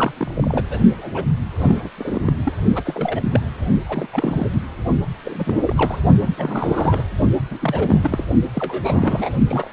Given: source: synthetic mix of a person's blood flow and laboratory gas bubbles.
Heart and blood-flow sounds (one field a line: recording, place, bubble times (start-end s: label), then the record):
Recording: Doppler ultrasound of blood flow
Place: precordium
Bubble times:
0.00-0.12 s: bubbles
0.17-0.64 s: bubbles
0.69-0.79 s: bubbles
0.98-1.24 s: bubbles
1.60-1.89 s: bubbles
1.97-2.33 s: bubbles
2.45-2.53 s: bubbles
2.75-3.41 s: bubbles
3.86-4.07 s: bubbles
4.12-4.48 s: bubbles
5.24-6.00 s: bubbles
6.21-6.29 s: bubbles
6.36-7.04 s: bubbles
7.50-8.25 s: bubbles
8.54-9.30 s: bubbles
9.47-9.70 s: bubbles
From the record:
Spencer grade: 3 (all of the cardiac periods contain showers or single bubble signals, but not dominating or overriding the cardiac motion signals)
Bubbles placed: only in the low amplitude regions of the cardiac cycle